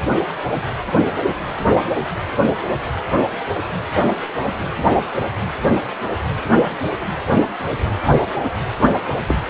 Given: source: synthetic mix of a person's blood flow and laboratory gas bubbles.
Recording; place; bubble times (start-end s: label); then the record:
Doppler ultrasound of blood flow; precordium
9.28-9.38 s: bubbles
From the record:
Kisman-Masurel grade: 112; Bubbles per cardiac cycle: 1 to 2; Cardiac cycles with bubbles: 1 to 10%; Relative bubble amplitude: moderate (0.250 to 0.450); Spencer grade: 1 (occasional bubble signal discernible with the cardiac motion signal, with majority of cardiac periods free of bubbles); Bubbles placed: anywhere in the cardiac cycle